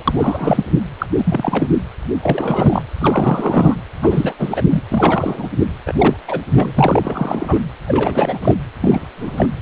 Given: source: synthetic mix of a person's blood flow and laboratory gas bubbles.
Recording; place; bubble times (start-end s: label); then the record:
Doppler ultrasound of blood flow; precordium
0.00-0.03 s: bubbles
0.08-0.65 s: bubbles
0.99-1.06 s: bubbles
1.18-1.68 s: bubbles
2.23-2.83 s: bubbles
2.99-3.75 s: bubbles
4.02-4.34 s: bubbles
4.39-4.62 s: bubbles
4.71-4.83 s: bubbles
4.90-5.47 s: bubbles
5.86-6.17 s: bubbles
6.28-6.39 s: bubbles
6.50-6.71 s: bubbles
6.74-7.60 s: bubbles
7.87-8.38 s: bubbles
8.41-8.54 s: bubbles
8.80-9.08 s: bubbles
9.18-9.46 s: bubbles
From the record:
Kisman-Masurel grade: 342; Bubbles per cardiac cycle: rolling drumbeat, 9 or more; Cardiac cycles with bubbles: 100%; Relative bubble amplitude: moderate (0.250 to 0.450); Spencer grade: 3 (all of the cardiac periods contain showers or single bubble signals, but not dominating or overriding the cardiac motion signals); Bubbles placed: anywhere in the cardiac cycle